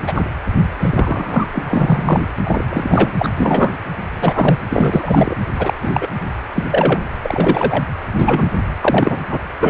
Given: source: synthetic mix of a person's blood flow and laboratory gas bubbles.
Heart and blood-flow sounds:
Doppler ultrasound of blood flow; precordium
0.07-0.23 s: bubbles
0.79-1.47 s: bubbles
1.53-2.20 s: bubbles
2.44-2.63 s: bubbles
2.70-3.12 s: bubbles
3.17-3.29 s: bubbles
3.35-3.76 s: bubbles
4.16-4.59 s: bubbles
4.70-5.38 s: bubbles
5.58-5.74 s: bubbles
5.81-6.08 s: bubbles
6.55-6.66 s: bubbles
6.71-7.00 s: bubbles
7.22-7.85 s: bubbles
8.14-8.50 s: bubbles
8.81-9.18 s: bubbles
9.30-9.39 s: bubbles
9.60-9.70 s: bubbles
From the record:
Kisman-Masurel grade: 243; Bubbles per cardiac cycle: several, 3 to 8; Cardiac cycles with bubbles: 100%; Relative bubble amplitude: loud (0.450 to 0.775); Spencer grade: 3 (all of the cardiac periods contain showers or single bubble signals, but not dominating or overriding the cardiac motion signals); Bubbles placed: anywhere in the cardiac cycle

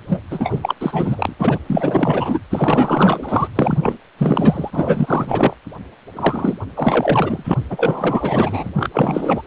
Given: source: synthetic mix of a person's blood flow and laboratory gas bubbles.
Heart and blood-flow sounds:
Doppler ultrasound of blood flow; precordium
0.08-0.20 s: bubbles
0.30-0.75 s: bubbles
0.81-1.33 s: bubbles
1.39-1.58 s: bubbles
1.67-2.40 s: bubbles
2.50-3.48 s: bubbles
3.55-3.97 s: bubbles
4.17-5.55 s: bubbles
6.16-6.54 s: bubbles
6.76-7.54 s: bubbles
7.70-8.71 s: bubbles
8.75-8.90 s: bubbles
8.93-9.42 s: bubbles
From the record:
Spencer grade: 4 (maximum detectable bubble signal sounding continuously throughout systole and diastole of every cardiac period, and overriding the amplitude of the normal cardiac signals); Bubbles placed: anywhere in the cardiac cycle

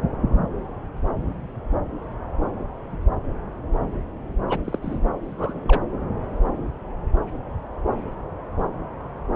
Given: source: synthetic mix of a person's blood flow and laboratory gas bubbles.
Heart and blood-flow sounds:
Doppler ultrasound of blood flow; subclavian vein
4.49-4.58 s: bubbles
4.65-4.79 s: bubbles
4.82-4.98 s: bubbles
5.23-5.81 s: bubbles
From the record:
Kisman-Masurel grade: 211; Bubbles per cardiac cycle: several, 3 to 8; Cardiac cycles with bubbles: 1 to 10%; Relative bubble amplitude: barely perceptible (0.100 to 0.250); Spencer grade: 1 (occasional bubble signal discernible with the cardiac motion signal, with majority of cardiac periods free of bubbles); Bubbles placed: anywhere in the cardiac cycle

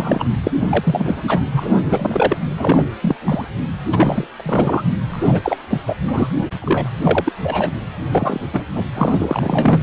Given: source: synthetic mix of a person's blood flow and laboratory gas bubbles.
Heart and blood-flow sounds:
Doppler ultrasound of blood flow; precordium
0.00-0.24 s: bubbles
0.43-0.51 s: bubbles
0.59-1.22 s: bubbles
1.27-1.41 s: bubbles
1.52-1.73 s: bubbles
1.83-2.37 s: bubbles
2.57-2.87 s: bubbles
3.02-3.16 s: bubbles
3.25-3.48 s: bubbles
3.92-4.27 s: bubbles
4.38-4.84 s: bubbles
5.10-5.41 s: bubbles
5.44-5.57 s: bubbles
5.70-5.80 s: bubbles
5.87-5.95 s: bubbles
6.04-6.28 s: bubbles
6.62-6.90 s: bubbles
7.01-7.33 s: bubbles
7.43-7.71 s: bubbles
8.13-8.39 s: bubbles
8.52-8.63 s: bubbles
8.75-8.84 s: bubbles
8.95-9.81 s: bubbles
From the record:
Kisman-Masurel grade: 332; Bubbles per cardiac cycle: rolling drumbeat, 9 or more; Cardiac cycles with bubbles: 50 to 99%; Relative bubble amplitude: moderate (0.250 to 0.450); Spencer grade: 3 (all of the cardiac periods contain showers or single bubble signals, but not dominating or overriding the cardiac motion signals); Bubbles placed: anywhere in the cardiac cycle

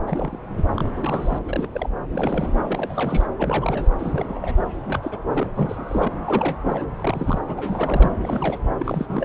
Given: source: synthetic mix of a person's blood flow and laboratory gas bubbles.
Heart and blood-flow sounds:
Doppler ultrasound of blood flow; subclavian vein
0.06-0.38 s: bubbles
0.53-0.65 s: bubbles
0.75-1.39 s: bubbles
1.48-1.69 s: bubbles
1.72-1.90 s: bubbles
2.12-2.52 s: bubbles
2.67-3.26 s: bubbles
3.38-3.88 s: bubbles
3.98-4.53 s: bubbles
4.83-5.00 s: bubbles
5.02-5.18 s: bubbles
5.26-5.47 s: bubbles
5.55-6.12 s: bubbles
6.25-6.85 s: bubbles
6.98-7.41 s: bubbles
7.46-7.54 s: bubbles
7.58-8.13 s: bubbles
8.21-8.59 s: bubbles
8.79-9.25 s: bubbles
From the record:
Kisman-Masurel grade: 342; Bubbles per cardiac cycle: rolling drumbeat, 9 or more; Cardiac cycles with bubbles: 100%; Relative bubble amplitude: moderate (0.250 to 0.450); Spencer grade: 3 (all of the cardiac periods contain showers or single bubble signals, but not dominating or overriding the cardiac motion signals); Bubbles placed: anywhere in the cardiac cycle

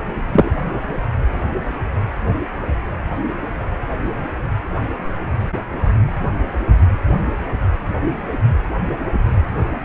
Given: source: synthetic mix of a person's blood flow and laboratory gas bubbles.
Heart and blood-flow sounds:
Doppler ultrasound of blood flow; precordium
0.33-0.51 s: bubbles
From the record:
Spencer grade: 1 (occasional bubble signal discernible with the cardiac motion signal, with majority of cardiac periods free of bubbles); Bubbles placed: anywhere in the cardiac cycle

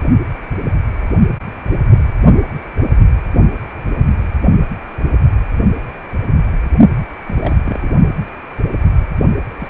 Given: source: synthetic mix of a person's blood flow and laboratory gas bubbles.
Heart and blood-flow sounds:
Doppler ultrasound of blood flow; precordium
6.97-7.03 s: bubbles
7.27-7.57 s: bubbles
7.64-7.89 s: bubbles
9.59-9.68 s: bubbles
From the record:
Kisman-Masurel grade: 221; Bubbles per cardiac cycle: several, 3 to 8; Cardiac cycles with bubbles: 10 to 50%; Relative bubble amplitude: barely perceptible (0.100 to 0.250); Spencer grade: 2 (many but less than half of the cardiac periods contain bubble signals, singularly or in groups); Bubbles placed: only in the low amplitude regions of the cardiac cycle

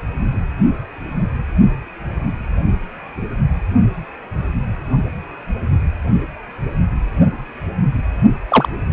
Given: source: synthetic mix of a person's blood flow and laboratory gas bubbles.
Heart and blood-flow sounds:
Doppler ultrasound of blood flow; precordium
8.48-8.69 s: bubbles
From the record:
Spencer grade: 1 (occasional bubble signal discernible with the cardiac motion signal, with majority of cardiac periods free of bubbles); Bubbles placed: only in the low amplitude regions of the cardiac cycle

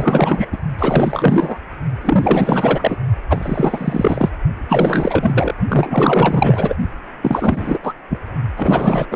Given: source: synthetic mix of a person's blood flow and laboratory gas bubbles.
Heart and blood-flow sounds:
Doppler ultrasound of blood flow; precordium
0.00-0.48 s: bubbles
0.52-0.57 s: bubbles
0.79-1.58 s: bubbles
2.01-2.98 s: bubbles
3.29-4.29 s: bubbles
4.68-5.54 s: bubbles
5.68-6.75 s: bubbles
7.22-7.79 s: bubbles
7.82-7.94 s: bubbles
8.09-8.19 s: bubbles
8.57-9.06 s: bubbles
9.11-9.16 s: bubbles
From the record:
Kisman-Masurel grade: 444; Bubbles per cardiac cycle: continuous sound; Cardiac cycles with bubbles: 100%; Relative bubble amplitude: maximal (0.775 to 0.999); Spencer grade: 4 (maximum detectable bubble signal sounding continuously throughout systole and diastole of every cardiac period, and overriding the amplitude of the normal cardiac signals); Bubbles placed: only in the low amplitude regions of the cardiac cycle

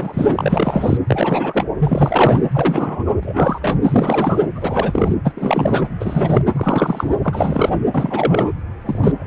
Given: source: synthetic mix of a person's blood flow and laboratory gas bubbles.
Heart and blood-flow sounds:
Doppler ultrasound of blood flow; precordium
0.00-0.97 s: bubbles
1.07-1.65 s: bubbles
1.79-2.41 s: bubbles
2.52-3.78 s: bubbles
3.83-4.46 s: bubbles
4.55-5.15 s: bubbles
5.24-5.33 s: bubbles
5.37-5.88 s: bubbles
6.00-6.45 s: bubbles
6.54-7.16 s: bubbles
7.22-7.70 s: bubbles
7.94-8.49 s: bubbles
8.85-9.12 s: bubbles
9.19-9.27 s: bubbles
From the record:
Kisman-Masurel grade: 343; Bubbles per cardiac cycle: rolling drumbeat, 9 or more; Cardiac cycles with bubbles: 100%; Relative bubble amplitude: loud (0.450 to 0.775); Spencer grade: 3 (all of the cardiac periods contain showers or single bubble signals, but not dominating or overriding the cardiac motion signals); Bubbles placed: anywhere in the cardiac cycle

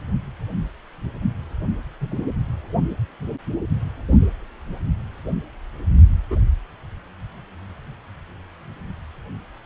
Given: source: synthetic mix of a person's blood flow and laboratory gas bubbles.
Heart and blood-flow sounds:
Doppler ultrasound of blood flow; precordium
2.01-2.29 s: bubbles
6.30-6.44 s: bubbles
From the record:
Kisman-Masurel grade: 121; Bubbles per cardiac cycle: 1 to 2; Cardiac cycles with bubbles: 10 to 50%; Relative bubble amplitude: barely perceptible (0.100 to 0.250); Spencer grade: 2 (many but less than half of the cardiac periods contain bubble signals, singularly or in groups); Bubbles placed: only in the low amplitude regions of the cardiac cycle

